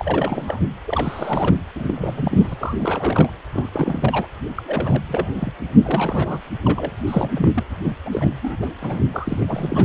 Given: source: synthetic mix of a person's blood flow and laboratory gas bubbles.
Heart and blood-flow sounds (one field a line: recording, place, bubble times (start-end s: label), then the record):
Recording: Doppler ultrasound of blood flow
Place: precordium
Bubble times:
0.00-0.64 s: bubbles
0.87-1.55 s: bubbles
1.75-3.29 s: bubbles
3.52-3.69 s: bubbles
3.73-4.27 s: bubbles
4.55-4.63 s: bubbles
4.67-5.01 s: bubbles
5.08-5.52 s: bubbles
5.83-6.41 s: bubbles
6.62-6.91 s: bubbles
7.07-7.51 s: bubbles
7.54-7.63 s: bubbles
7.84-7.92 s: bubbles
8.05-8.30 s: bubbles
8.42-8.57 s: bubbles
8.62-8.69 s: bubbles
8.81-9.04 s: bubbles
9.13-9.85 s: bubbles
From the record:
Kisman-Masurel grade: 342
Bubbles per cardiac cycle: rolling drumbeat, 9 or more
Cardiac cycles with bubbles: 100%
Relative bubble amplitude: moderate (0.250 to 0.450)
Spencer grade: 3 (all of the cardiac periods contain showers or single bubble signals, but not dominating or overriding the cardiac motion signals)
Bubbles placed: anywhere in the cardiac cycle